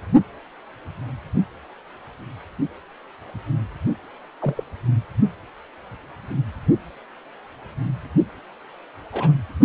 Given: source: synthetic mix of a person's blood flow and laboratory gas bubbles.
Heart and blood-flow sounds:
Doppler ultrasound of blood flow; precordium
4.41-4.63 s: bubbles
9.12-9.33 s: bubbles
From the record:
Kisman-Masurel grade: 121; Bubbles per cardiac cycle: 1 to 2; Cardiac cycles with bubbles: 10 to 50%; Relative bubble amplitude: barely perceptible (0.100 to 0.250); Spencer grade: 2 (many but less than half of the cardiac periods contain bubble signals, singularly or in groups); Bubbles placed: only in the low amplitude regions of the cardiac cycle

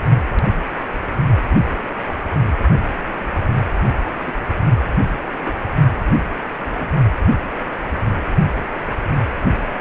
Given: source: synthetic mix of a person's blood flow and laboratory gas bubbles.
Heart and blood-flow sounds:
Doppler ultrasound of blood flow; precordium
1.49-1.77 s: bubbles
2.48-2.52 s: bubbles
4.25-4.34 s: bubbles
5.45-5.53 s: bubbles
6.72-6.89 s: bubbles
From the record:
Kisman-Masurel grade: 121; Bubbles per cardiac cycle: 1 to 2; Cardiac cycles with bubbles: 10 to 50%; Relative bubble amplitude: barely perceptible (0.100 to 0.250); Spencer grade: 2 (many but less than half of the cardiac periods contain bubble signals, singularly or in groups); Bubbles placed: only in the low amplitude regions of the cardiac cycle

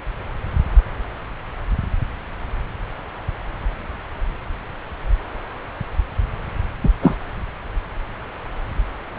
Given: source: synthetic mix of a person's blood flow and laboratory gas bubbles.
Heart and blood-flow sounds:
Doppler ultrasound of blood flow; subclavian vein
6.83-6.90 s: bubbles
7.02-7.14 s: bubbles
From the record:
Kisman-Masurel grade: 113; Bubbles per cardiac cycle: 1 to 2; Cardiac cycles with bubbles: 1 to 10%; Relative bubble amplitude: loud (0.450 to 0.775); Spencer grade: 1 (occasional bubble signal discernible with the cardiac motion signal, with majority of cardiac periods free of bubbles); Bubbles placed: anywhere in the cardiac cycle

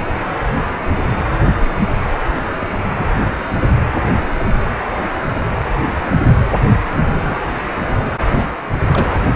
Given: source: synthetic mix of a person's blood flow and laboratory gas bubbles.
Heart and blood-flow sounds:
Doppler ultrasound of blood flow; precordium
2.98-3.07 s: bubbles
7.27-7.39 s: bubbles
8.31-8.57 s: bubbles
8.93-9.07 s: bubbles
From the record:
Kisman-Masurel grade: 122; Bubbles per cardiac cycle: 1 to 2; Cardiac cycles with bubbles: 10 to 50%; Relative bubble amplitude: moderate (0.250 to 0.450); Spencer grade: 2 (many but less than half of the cardiac periods contain bubble signals, singularly or in groups); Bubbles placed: anywhere in the cardiac cycle

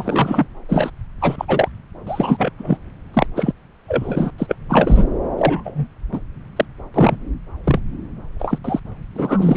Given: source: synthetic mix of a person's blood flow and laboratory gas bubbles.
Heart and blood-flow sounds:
Doppler ultrasound of blood flow; subclavian vein
0.00-0.46 s: bubbles
0.68-0.90 s: bubbles
1.21-1.45 s: bubbles
1.48-1.69 s: bubbles
2.07-2.52 s: bubbles
2.59-2.77 s: bubbles
3.14-3.27 s: bubbles
3.35-3.52 s: bubbles
3.88-4.30 s: bubbles
4.38-4.55 s: bubbles
4.68-5.04 s: bubbles
5.38-5.87 s: bubbles
6.12-6.20 s: bubbles
6.56-6.65 s: bubbles
6.93-7.16 s: bubbles
7.64-7.79 s: bubbles
8.39-8.59 s: bubbles
8.64-8.80 s: bubbles
9.15-9.57 s: bubbles
From the record:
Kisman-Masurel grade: 243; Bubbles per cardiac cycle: several, 3 to 8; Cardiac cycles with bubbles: 100%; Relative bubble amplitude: loud (0.450 to 0.775); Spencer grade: 3 (all of the cardiac periods contain showers or single bubble signals, but not dominating or overriding the cardiac motion signals); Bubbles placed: anywhere in the cardiac cycle

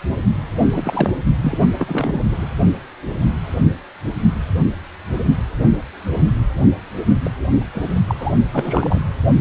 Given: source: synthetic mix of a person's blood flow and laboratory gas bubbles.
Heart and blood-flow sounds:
Doppler ultrasound of blood flow; precordium
0.70-1.12 s: bubbles
1.42-1.58 s: bubbles
1.78-2.24 s: bubbles
2.31-2.47 s: bubbles
7.23-7.31 s: bubbles
7.72-8.01 s: bubbles
8.08-8.14 s: bubbles
8.19-8.32 s: bubbles
8.52-9.06 s: bubbles
From the record:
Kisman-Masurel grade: 232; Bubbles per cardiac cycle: several, 3 to 8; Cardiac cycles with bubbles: 50 to 99%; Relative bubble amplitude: moderate (0.250 to 0.450); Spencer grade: 3 (all of the cardiac periods contain showers or single bubble signals, but not dominating or overriding the cardiac motion signals); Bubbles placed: only in the low amplitude regions of the cardiac cycle

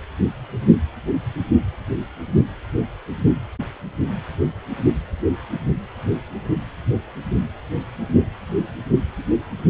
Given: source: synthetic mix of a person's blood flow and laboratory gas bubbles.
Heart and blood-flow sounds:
Doppler ultrasound of blood flow; precordium
no bubbles
From the record:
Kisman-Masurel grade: 000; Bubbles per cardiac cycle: 0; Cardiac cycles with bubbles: 0%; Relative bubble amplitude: no bubbles discernible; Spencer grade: 0 (complete lack of bubble signals)

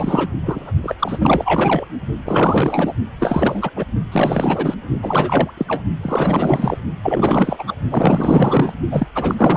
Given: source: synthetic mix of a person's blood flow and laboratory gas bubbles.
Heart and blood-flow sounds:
Doppler ultrasound of blood flow; precordium
0.00-0.28 s: bubbles
0.46-0.72 s: bubbles
0.83-0.95 s: bubbles
0.99-1.87 s: bubbles
2.25-2.94 s: bubbles
3.19-3.71 s: bubbles
3.75-3.85 s: bubbles
4.12-4.74 s: bubbles
5.01-5.53 s: bubbles
5.57-5.82 s: bubbles
6.03-6.78 s: bubbles
7.03-7.64 s: bubbles
7.67-7.76 s: bubbles
7.90-8.74 s: bubbles
8.91-9.07 s: bubbles
9.14-9.35 s: bubbles
9.38-9.56 s: bubbles
From the record:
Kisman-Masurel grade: 444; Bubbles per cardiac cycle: continuous sound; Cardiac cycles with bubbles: 100%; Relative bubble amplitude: maximal (0.775 to 0.999); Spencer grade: 4 (maximum detectable bubble signal sounding continuously throughout systole and diastole of every cardiac period, and overriding the amplitude of the normal cardiac signals); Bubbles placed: only in the low amplitude regions of the cardiac cycle

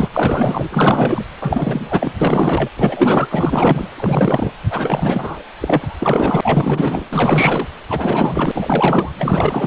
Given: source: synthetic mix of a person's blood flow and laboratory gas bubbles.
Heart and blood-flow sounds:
Doppler ultrasound of blood flow; precordium
0.00-0.10 s: bubbles
0.14-1.24 s: bubbles
1.41-2.13 s: bubbles
2.21-2.69 s: bubbles
2.76-3.28 s: bubbles
3.30-3.89 s: bubbles
3.97-4.51 s: bubbles
4.69-5.44 s: bubbles
5.58-7.05 s: bubbles
7.11-7.68 s: bubbles
7.88-9.12 s: bubbles
9.18-9.67 s: bubbles
From the record:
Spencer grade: 4 (maximum detectable bubble signal sounding continuously throughout systole and diastole of every cardiac period, and overriding the amplitude of the normal cardiac signals); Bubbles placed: anywhere in the cardiac cycle

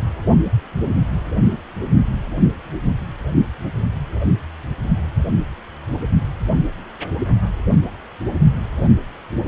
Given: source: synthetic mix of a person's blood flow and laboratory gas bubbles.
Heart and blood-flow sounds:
Doppler ultrasound of blood flow; precordium
no bubbles
From the record:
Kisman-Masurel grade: 000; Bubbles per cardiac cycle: 0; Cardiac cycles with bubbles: 0%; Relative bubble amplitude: no bubbles discernible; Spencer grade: 0 (complete lack of bubble signals)

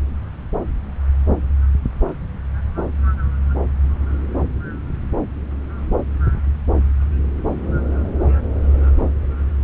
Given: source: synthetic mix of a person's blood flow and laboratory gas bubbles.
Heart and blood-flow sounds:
Doppler ultrasound of blood flow; subclavian vein
no bubbles
From the record:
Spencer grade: 0 (complete lack of bubble signals)

